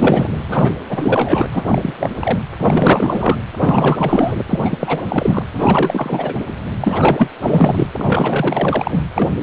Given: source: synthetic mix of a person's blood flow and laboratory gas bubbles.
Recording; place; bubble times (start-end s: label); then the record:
Doppler ultrasound of blood flow; precordium
0.00-0.28 s: bubbles
0.48-0.73 s: bubbles
0.89-1.46 s: bubbles
1.51-1.93 s: bubbles
2.00-2.09 s: bubbles
2.20-2.38 s: bubbles
2.59-3.38 s: bubbles
3.57-4.34 s: bubbles
4.50-4.59 s: bubbles
4.64-5.03 s: bubbles
5.06-5.42 s: bubbles
5.54-6.35 s: bubbles
6.80-7.30 s: bubbles
7.41-7.87 s: bubbles
7.99-9.02 s: bubbles
9.14-9.29 s: bubbles
9.39-9.43 s: bubbles
From the record:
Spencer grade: 4 (maximum detectable bubble signal sounding continuously throughout systole and diastole of every cardiac period, and overriding the amplitude of the normal cardiac signals); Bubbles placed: anywhere in the cardiac cycle